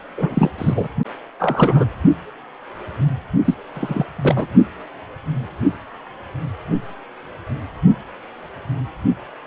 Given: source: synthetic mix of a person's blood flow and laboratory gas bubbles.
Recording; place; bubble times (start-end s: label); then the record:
Doppler ultrasound of blood flow; precordium
0.17-0.50 s: bubbles
0.58-0.89 s: bubbles
1.40-1.85 s: bubbles
3.44-3.54 s: bubbles
3.74-4.04 s: bubbles
4.18-4.47 s: bubbles
From the record:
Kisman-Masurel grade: 223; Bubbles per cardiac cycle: several, 3 to 8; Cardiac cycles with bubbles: 10 to 50%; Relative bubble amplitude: loud (0.450 to 0.775); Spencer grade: 2 (many but less than half of the cardiac periods contain bubble signals, singularly or in groups); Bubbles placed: only in the low amplitude regions of the cardiac cycle